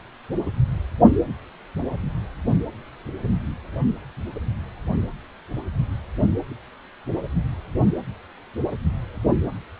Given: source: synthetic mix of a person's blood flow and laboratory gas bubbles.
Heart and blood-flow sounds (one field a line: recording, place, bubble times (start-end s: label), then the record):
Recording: Doppler ultrasound of blood flow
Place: precordium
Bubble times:
no bubbles
From the record:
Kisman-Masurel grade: 000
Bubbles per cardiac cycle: 0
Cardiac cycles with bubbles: 0%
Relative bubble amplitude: no bubbles discernible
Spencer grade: 0 (complete lack of bubble signals)